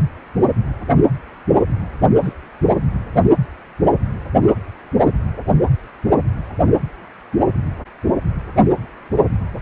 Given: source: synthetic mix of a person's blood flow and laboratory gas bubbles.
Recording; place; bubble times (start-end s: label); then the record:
Doppler ultrasound of blood flow; precordium
2.23-2.33 s: bubbles
2.70-2.77 s: bubbles
From the record:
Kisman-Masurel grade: 111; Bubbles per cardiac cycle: 1 to 2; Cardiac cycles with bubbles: 1 to 10%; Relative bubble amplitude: barely perceptible (0.100 to 0.250); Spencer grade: 1 (occasional bubble signal discernible with the cardiac motion signal, with majority of cardiac periods free of bubbles); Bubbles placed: anywhere in the cardiac cycle